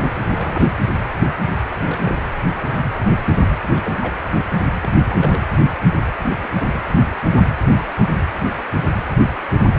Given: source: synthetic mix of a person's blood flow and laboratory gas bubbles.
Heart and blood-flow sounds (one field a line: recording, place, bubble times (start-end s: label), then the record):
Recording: Doppler ultrasound of blood flow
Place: precordium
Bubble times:
0.29-0.75 s: bubbles
1.69-1.77 s: bubbles
1.80-2.19 s: bubbles
3.75-4.15 s: bubbles
4.82-4.90 s: bubbles
5.08-5.44 s: bubbles
6.22-6.31 s: bubbles
6.44-6.48 s: bubbles
6.66-6.78 s: bubbles
From the record:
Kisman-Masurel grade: 221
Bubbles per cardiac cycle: several, 3 to 8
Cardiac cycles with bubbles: 10 to 50%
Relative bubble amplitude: barely perceptible (0.100 to 0.250)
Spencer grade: 2 (many but less than half of the cardiac periods contain bubble signals, singularly or in groups)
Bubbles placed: anywhere in the cardiac cycle